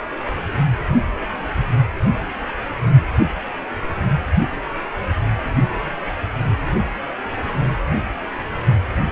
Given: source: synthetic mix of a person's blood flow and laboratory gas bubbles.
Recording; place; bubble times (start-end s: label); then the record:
Doppler ultrasound of blood flow; precordium
no bubbles
From the record:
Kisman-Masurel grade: 000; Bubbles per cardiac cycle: 0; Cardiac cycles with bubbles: 0%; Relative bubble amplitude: no bubbles discernible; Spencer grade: 0 (complete lack of bubble signals)